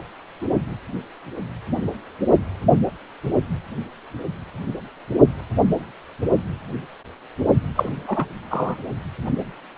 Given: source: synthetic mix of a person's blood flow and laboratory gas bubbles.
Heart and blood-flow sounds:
Doppler ultrasound of blood flow; precordium
7.75-8.27 s: bubbles
8.50-8.77 s: bubbles
From the record:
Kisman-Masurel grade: 213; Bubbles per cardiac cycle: several, 3 to 8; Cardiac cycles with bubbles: 1 to 10%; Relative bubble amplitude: loud (0.450 to 0.775); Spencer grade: 1 (occasional bubble signal discernible with the cardiac motion signal, with majority of cardiac periods free of bubbles); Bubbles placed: only in the low amplitude regions of the cardiac cycle

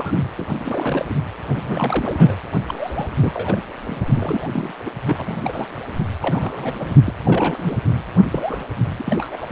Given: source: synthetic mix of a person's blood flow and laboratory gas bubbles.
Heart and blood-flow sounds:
Doppler ultrasound of blood flow; precordium
0.00-0.20 s: bubbles
0.37-1.05 s: bubbles
1.08-1.16 s: bubbles
1.48-2.35 s: bubbles
2.68-3.09 s: bubbles
3.19-3.62 s: bubbles
3.87-4.73 s: bubbles
4.85-4.90 s: bubbles
5.04-5.67 s: bubbles
6.21-6.96 s: bubbles
7.05-7.14 s: bubbles
7.25-7.77 s: bubbles
8.30-8.67 s: bubbles
8.98-9.37 s: bubbles
9.40-9.52 s: bubbles
From the record:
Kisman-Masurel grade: 342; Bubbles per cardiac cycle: rolling drumbeat, 9 or more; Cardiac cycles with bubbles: 100%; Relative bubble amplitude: moderate (0.250 to 0.450); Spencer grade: 3 (all of the cardiac periods contain showers or single bubble signals, but not dominating or overriding the cardiac motion signals); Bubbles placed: anywhere in the cardiac cycle

